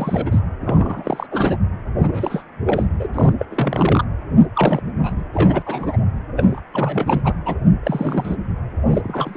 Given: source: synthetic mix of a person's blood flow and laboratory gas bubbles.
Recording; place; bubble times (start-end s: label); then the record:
Doppler ultrasound of blood flow; precordium
0.00-0.40 s: bubbles
0.61-1.26 s: bubbles
1.31-1.56 s: bubbles
2.03-2.44 s: bubbles
2.66-2.87 s: bubbles
3.00-3.08 s: bubbles
3.14-3.33 s: bubbles
3.38-3.46 s: bubbles
3.51-4.04 s: bubbles
4.38-4.46 s: bubbles
4.55-4.81 s: bubbles
4.97-5.23 s: bubbles
5.33-5.62 s: bubbles
5.66-5.97 s: bubbles
6.35-6.60 s: bubbles
6.73-7.33 s: bubbles
7.46-7.55 s: bubbles
7.83-8.36 s: bubbles
8.90-9.02 s: bubbles
9.04-9.37 s: bubbles
From the record:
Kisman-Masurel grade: 342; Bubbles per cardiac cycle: rolling drumbeat, 9 or more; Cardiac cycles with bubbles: 100%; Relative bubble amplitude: moderate (0.250 to 0.450); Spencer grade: 3 (all of the cardiac periods contain showers or single bubble signals, but not dominating or overriding the cardiac motion signals); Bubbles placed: anywhere in the cardiac cycle